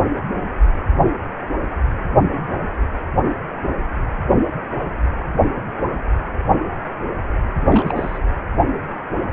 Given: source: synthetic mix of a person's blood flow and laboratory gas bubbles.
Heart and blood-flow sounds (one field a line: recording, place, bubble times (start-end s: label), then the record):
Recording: Doppler ultrasound of blood flow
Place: precordium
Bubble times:
7.70-8.18 s: bubbles
From the record:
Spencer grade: 1 (occasional bubble signal discernible with the cardiac motion signal, with majority of cardiac periods free of bubbles)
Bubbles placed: anywhere in the cardiac cycle